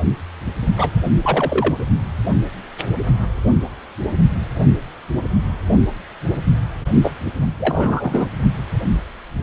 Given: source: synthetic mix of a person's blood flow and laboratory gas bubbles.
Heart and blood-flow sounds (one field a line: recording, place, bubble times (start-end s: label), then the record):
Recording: Doppler ultrasound of blood flow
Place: precordium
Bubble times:
0.77-0.91 s: bubbles
1.22-1.74 s: bubbles
7.03-7.12 s: bubbles
7.59-8.29 s: bubbles
From the record:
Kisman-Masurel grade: 222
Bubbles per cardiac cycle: several, 3 to 8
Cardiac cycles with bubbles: 10 to 50%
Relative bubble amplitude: moderate (0.250 to 0.450)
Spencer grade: 2 (many but less than half of the cardiac periods contain bubble signals, singularly or in groups)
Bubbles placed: only in the low amplitude regions of the cardiac cycle